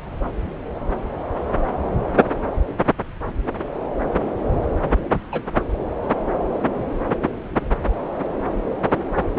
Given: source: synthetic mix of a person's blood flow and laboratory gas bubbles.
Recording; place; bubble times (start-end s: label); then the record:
Doppler ultrasound of blood flow; subclavian vein
4.81-4.92 s: bubbles
5.32-5.42 s: bubbles
From the record:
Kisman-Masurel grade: 111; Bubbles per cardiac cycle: 1 to 2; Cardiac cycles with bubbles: 1 to 10%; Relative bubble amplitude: barely perceptible (0.100 to 0.250); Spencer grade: 1 (occasional bubble signal discernible with the cardiac motion signal, with majority of cardiac periods free of bubbles); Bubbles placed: anywhere in the cardiac cycle